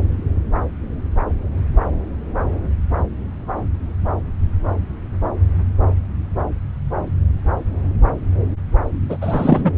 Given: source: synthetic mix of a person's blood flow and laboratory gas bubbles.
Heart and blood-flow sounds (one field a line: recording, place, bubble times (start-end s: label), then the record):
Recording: Doppler ultrasound of blood flow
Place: subclavian vein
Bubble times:
9.09-9.17 s: bubbles
9.21-9.71 s: bubbles
From the record:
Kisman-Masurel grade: 213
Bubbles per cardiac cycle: several, 3 to 8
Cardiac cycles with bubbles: 1 to 10%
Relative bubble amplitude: loud (0.450 to 0.775)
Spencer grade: 1 (occasional bubble signal discernible with the cardiac motion signal, with majority of cardiac periods free of bubbles)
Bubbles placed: anywhere in the cardiac cycle